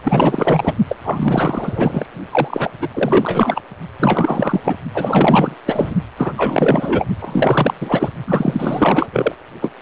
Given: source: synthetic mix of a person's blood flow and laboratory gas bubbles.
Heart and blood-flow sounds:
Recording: Doppler ultrasound of blood flow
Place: precordium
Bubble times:
0.03-0.76 s: bubbles
0.89-0.96 s: bubbles
1.03-2.06 s: bubbles
2.31-2.71 s: bubbles
2.81-2.88 s: bubbles
2.94-3.61 s: bubbles
4.00-4.60 s: bubbles
4.64-4.79 s: bubbles
4.93-5.55 s: bubbles
5.66-5.94 s: bubbles
6.17-6.32 s: bubbles
6.37-7.04 s: bubbles
7.21-7.74 s: bubbles
7.80-8.10 s: bubbles
8.27-9.08 s: bubbles
9.12-9.36 s: bubbles
9.61-9.72 s: bubbles
From the record:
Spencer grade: 4 (maximum detectable bubble signal sounding continuously throughout systole and diastole of every cardiac period, and overriding the amplitude of the normal cardiac signals)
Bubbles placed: only in the low amplitude regions of the cardiac cycle

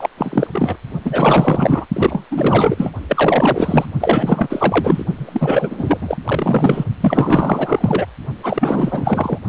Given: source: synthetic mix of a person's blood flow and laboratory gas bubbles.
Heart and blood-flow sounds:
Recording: Doppler ultrasound of blood flow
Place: precordium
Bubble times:
0.00-0.08 s: bubbles
0.17-0.47 s: bubbles
0.53-0.78 s: bubbles
1.04-1.86 s: bubbles
1.93-2.26 s: bubbles
2.31-2.92 s: bubbles
3.08-3.85 s: bubbles
4.00-5.05 s: bubbles
5.17-5.98 s: bubbles
6.00-6.18 s: bubbles
6.24-6.84 s: bubbles
7.00-8.06 s: bubbles
8.43-9.38 s: bubbles
From the record:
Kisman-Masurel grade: 444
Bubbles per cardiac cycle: continuous sound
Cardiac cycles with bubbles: 100%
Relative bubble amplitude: maximal (0.775 to 0.999)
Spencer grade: 4 (maximum detectable bubble signal sounding continuously throughout systole and diastole of every cardiac period, and overriding the amplitude of the normal cardiac signals)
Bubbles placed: only in the low amplitude regions of the cardiac cycle

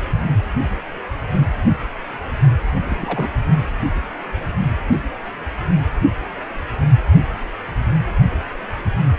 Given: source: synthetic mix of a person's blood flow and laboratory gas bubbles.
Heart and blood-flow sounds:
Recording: Doppler ultrasound of blood flow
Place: precordium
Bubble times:
2.75-2.79 s: bubbles
2.89-3.30 s: bubbles
From the record:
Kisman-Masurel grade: 221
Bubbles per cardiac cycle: several, 3 to 8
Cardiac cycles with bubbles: 10 to 50%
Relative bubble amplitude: barely perceptible (0.100 to 0.250)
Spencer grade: 2 (many but less than half of the cardiac periods contain bubble signals, singularly or in groups)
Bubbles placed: only in the low amplitude regions of the cardiac cycle

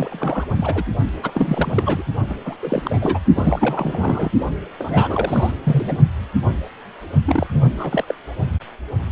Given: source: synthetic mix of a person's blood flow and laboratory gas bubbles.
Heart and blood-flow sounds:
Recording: Doppler ultrasound of blood flow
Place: precordium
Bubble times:
0.00-0.47 s: bubbles
0.55-0.83 s: bubbles
1.23-1.31 s: bubbles
1.34-2.03 s: bubbles
2.29-2.35 s: bubbles
2.45-2.56 s: bubbles
2.62-3.19 s: bubbles
3.35-4.31 s: bubbles
4.78-5.52 s: bubbles
5.63-5.98 s: bubbles
7.25-7.46 s: bubbles
7.53-7.66 s: bubbles
7.79-8.04 s: bubbles
8.08-8.14 s: bubbles
From the record:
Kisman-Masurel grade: 332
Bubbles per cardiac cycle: rolling drumbeat, 9 or more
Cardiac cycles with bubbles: 50 to 99%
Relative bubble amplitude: moderate (0.250 to 0.450)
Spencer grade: 3 (all of the cardiac periods contain showers or single bubble signals, but not dominating or overriding the cardiac motion signals)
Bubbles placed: only in the low amplitude regions of the cardiac cycle

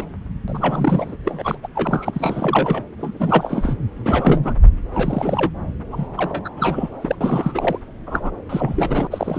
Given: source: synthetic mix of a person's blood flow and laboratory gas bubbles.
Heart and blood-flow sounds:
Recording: Doppler ultrasound of blood flow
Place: subclavian vein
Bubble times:
0.00-0.04 s: bubbles
0.47-1.16 s: bubbles
1.25-1.57 s: bubbles
1.63-1.68 s: bubbles
1.75-2.83 s: bubbles
2.97-3.75 s: bubbles
4.04-4.53 s: bubbles
4.92-5.51 s: bubbles
5.91-6.06 s: bubbles
6.17-6.49 s: bubbles
6.56-6.89 s: bubbles
7.01-7.15 s: bubbles
7.21-7.79 s: bubbles
8.07-8.31 s: bubbles
8.49-9.08 s: bubbles
9.11-9.39 s: bubbles
From the record:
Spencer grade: 3 (all of the cardiac periods contain showers or single bubble signals, but not dominating or overriding the cardiac motion signals)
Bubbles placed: anywhere in the cardiac cycle

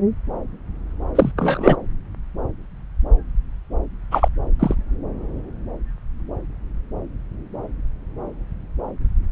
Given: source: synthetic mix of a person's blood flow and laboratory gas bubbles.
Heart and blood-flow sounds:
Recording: Doppler ultrasound of blood flow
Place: subclavian vein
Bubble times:
1.15-1.31 s: bubbles
1.37-1.76 s: bubbles
4.11-4.29 s: bubbles
4.59-4.75 s: bubbles
From the record:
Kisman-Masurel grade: 223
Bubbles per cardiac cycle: several, 3 to 8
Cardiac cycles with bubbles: 10 to 50%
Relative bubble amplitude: loud (0.450 to 0.775)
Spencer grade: 2 (many but less than half of the cardiac periods contain bubble signals, singularly or in groups)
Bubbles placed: anywhere in the cardiac cycle

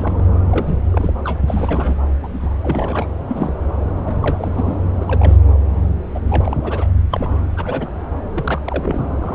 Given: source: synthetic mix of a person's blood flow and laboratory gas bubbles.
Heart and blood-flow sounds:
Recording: Doppler ultrasound of blood flow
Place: subclavian vein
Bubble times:
0.00-0.26 s: bubbles
0.49-0.79 s: bubbles
0.92-1.11 s: bubbles
1.24-1.41 s: bubbles
1.48-1.95 s: bubbles
2.23-2.28 s: bubbles
2.33-2.57 s: bubbles
2.62-3.08 s: bubbles
3.29-3.54 s: bubbles
4.05-4.18 s: bubbles
4.22-4.75 s: bubbles
5.00-5.37 s: bubbles
6.14-6.20 s: bubbles
6.29-6.57 s: bubbles
6.63-6.88 s: bubbles
7.10-7.47 s: bubbles
7.56-7.88 s: bubbles
8.33-8.61 s: bubbles
8.65-9.04 s: bubbles
9.21-9.35 s: bubbles
From the record:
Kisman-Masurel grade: 242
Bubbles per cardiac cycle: several, 3 to 8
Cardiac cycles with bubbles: 100%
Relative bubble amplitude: moderate (0.250 to 0.450)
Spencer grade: 3 (all of the cardiac periods contain showers or single bubble signals, but not dominating or overriding the cardiac motion signals)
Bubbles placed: anywhere in the cardiac cycle

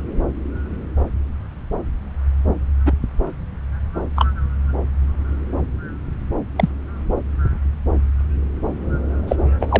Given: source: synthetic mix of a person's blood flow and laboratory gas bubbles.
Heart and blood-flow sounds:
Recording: Doppler ultrasound of blood flow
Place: subclavian vein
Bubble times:
2.85-2.92 s: bubbles
4.16-4.26 s: bubbles
6.56-6.69 s: bubbles
9.28-9.36 s: bubbles
9.60-9.80 s: bubbles
From the record:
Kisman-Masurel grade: 123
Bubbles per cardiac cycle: 1 to 2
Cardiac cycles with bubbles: 10 to 50%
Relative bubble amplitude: loud (0.450 to 0.775)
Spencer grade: 2 (many but less than half of the cardiac periods contain bubble signals, singularly or in groups)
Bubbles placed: anywhere in the cardiac cycle

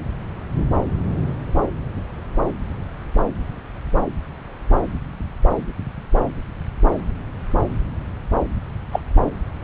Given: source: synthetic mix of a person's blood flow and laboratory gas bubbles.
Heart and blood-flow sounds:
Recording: Doppler ultrasound of blood flow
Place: subclavian vein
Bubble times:
8.92-9.00 s: bubbles
From the record:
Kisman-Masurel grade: 113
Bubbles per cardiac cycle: 1 to 2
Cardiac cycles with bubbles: 1 to 10%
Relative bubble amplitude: loud (0.450 to 0.775)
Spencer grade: 1 (occasional bubble signal discernible with the cardiac motion signal, with majority of cardiac periods free of bubbles)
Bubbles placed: anywhere in the cardiac cycle

